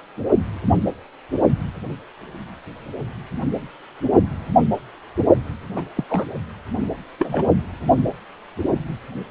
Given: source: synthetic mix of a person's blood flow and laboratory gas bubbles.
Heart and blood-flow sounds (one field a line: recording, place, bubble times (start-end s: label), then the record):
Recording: Doppler ultrasound of blood flow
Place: precordium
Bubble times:
5.76-5.86 s: bubbles
5.96-6.04 s: bubbles
6.10-6.24 s: bubbles
7.19-7.45 s: bubbles
From the record:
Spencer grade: 1 (occasional bubble signal discernible with the cardiac motion signal, with majority of cardiac periods free of bubbles)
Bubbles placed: only in the low amplitude regions of the cardiac cycle